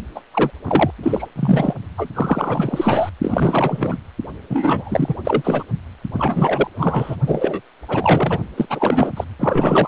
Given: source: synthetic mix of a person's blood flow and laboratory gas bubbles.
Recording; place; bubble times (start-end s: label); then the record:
Doppler ultrasound of blood flow; precordium
0.15-0.20 s: bubbles
0.34-0.51 s: bubbles
0.65-0.90 s: bubbles
1.02-1.27 s: bubbles
1.35-1.74 s: bubbles
1.97-2.09 s: bubbles
2.15-3.09 s: bubbles
3.22-3.99 s: bubbles
4.49-5.17 s: bubbles
5.25-5.63 s: bubbles
6.13-6.67 s: bubbles
6.78-7.16 s: bubbles
7.26-7.61 s: bubbles
7.88-8.39 s: bubbles
8.57-9.12 s: bubbles
9.17-9.24 s: bubbles
9.39-9.88 s: bubbles
From the record:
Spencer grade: 4 (maximum detectable bubble signal sounding continuously throughout systole and diastole of every cardiac period, and overriding the amplitude of the normal cardiac signals); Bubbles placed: only in the low amplitude regions of the cardiac cycle